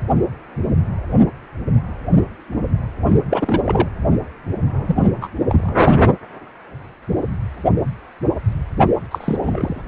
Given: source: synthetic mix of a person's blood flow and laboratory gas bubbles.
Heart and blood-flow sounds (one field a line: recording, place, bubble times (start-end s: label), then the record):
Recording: Doppler ultrasound of blood flow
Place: precordium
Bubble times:
3.09-3.21 s: bubbles
3.30-3.60 s: bubbles
3.66-3.89 s: bubbles
4.87-5.04 s: bubbles
5.21-5.29 s: bubbles
5.49-5.72 s: bubbles
9.11-9.37 s: bubbles
9.41-9.81 s: bubbles
From the record:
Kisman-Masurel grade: 222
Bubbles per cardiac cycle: several, 3 to 8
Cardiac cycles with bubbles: 10 to 50%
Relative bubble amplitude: moderate (0.250 to 0.450)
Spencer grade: 2 (many but less than half of the cardiac periods contain bubble signals, singularly or in groups)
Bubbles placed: anywhere in the cardiac cycle